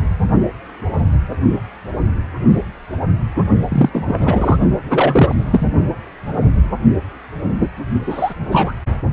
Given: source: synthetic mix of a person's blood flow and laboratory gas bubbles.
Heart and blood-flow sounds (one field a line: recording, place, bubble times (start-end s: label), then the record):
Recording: Doppler ultrasound of blood flow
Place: precordium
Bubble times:
3.70-3.89 s: bubbles
3.93-4.58 s: bubbles
4.88-5.35 s: bubbles
5.51-5.67 s: bubbles
8.06-8.34 s: bubbles
8.51-8.73 s: bubbles
From the record:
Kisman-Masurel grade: 223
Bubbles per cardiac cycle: several, 3 to 8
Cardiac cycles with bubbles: 10 to 50%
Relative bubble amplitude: loud (0.450 to 0.775)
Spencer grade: 2 (many but less than half of the cardiac periods contain bubble signals, singularly or in groups)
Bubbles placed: only in the low amplitude regions of the cardiac cycle